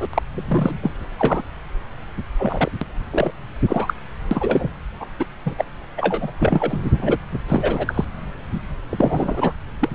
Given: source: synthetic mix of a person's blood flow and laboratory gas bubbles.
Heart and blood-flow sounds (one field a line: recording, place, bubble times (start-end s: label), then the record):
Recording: Doppler ultrasound of blood flow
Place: subclavian vein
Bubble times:
0.00-0.07 s: bubbles
0.13-0.22 s: bubbles
0.32-0.75 s: bubbles
0.82-0.92 s: bubbles
1.19-1.42 s: bubbles
2.39-2.71 s: bubbles
2.81-2.86 s: bubbles
3.11-3.31 s: bubbles
3.68-3.94 s: bubbles
4.31-4.73 s: bubbles
5.00-5.06 s: bubbles
5.19-5.25 s: bubbles
5.46-5.55 s: bubbles
5.58-5.65 s: bubbles
5.97-6.31 s: bubbles
6.40-6.78 s: bubbles
6.93-7.18 s: bubbles
7.48-8.05 s: bubbles
8.89-9.53 s: bubbles
9.79-9.89 s: bubbles
9.93-9.95 s: bubbles
From the record:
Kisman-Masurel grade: 232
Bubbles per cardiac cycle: several, 3 to 8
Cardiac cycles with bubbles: 50 to 99%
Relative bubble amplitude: moderate (0.250 to 0.450)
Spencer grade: 3 (all of the cardiac periods contain showers or single bubble signals, but not dominating or overriding the cardiac motion signals)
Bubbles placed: anywhere in the cardiac cycle